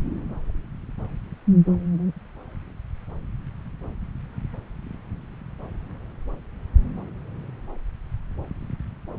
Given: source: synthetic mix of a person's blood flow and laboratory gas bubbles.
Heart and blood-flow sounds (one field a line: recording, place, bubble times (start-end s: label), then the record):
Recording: Doppler ultrasound of blood flow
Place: subclavian vein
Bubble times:
no bubbles
From the record:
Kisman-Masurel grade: 000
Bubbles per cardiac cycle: 0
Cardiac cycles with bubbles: 0%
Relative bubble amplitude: no bubbles discernible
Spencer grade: 0 (complete lack of bubble signals)